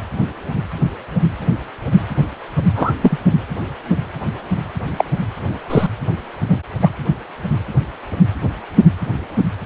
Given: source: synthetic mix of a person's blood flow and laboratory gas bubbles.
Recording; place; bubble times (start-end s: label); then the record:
Doppler ultrasound of blood flow; precordium
2.75-2.93 s: bubbles
3.02-3.17 s: bubbles
4.98-5.04 s: bubbles
5.70-5.87 s: bubbles
6.49-6.60 s: bubbles
6.82-6.90 s: bubbles
From the record:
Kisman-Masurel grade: 123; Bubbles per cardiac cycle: 1 to 2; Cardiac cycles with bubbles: 10 to 50%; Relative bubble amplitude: loud (0.450 to 0.775); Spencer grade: 2 (many but less than half of the cardiac periods contain bubble signals, singularly or in groups); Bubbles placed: anywhere in the cardiac cycle